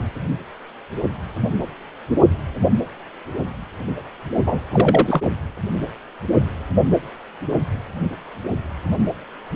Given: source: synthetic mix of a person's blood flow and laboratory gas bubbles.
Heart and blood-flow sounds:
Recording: Doppler ultrasound of blood flow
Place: precordium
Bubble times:
4.46-4.60 s: bubbles
4.72-5.22 s: bubbles
From the record:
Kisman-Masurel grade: 213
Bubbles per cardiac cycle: several, 3 to 8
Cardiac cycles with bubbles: 1 to 10%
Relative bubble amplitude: loud (0.450 to 0.775)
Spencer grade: 1 (occasional bubble signal discernible with the cardiac motion signal, with majority of cardiac periods free of bubbles)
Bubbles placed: only in the low amplitude regions of the cardiac cycle

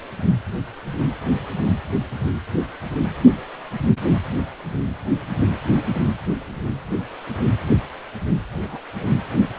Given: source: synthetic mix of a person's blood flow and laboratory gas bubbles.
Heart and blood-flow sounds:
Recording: Doppler ultrasound of blood flow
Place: precordium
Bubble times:
8.51-8.80 s: bubbles
8.95-9.00 s: bubbles
9.03-9.10 s: bubbles
From the record:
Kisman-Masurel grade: 211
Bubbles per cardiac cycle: several, 3 to 8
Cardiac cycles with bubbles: 1 to 10%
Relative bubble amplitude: barely perceptible (0.100 to 0.250)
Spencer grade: 1 (occasional bubble signal discernible with the cardiac motion signal, with majority of cardiac periods free of bubbles)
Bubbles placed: anywhere in the cardiac cycle

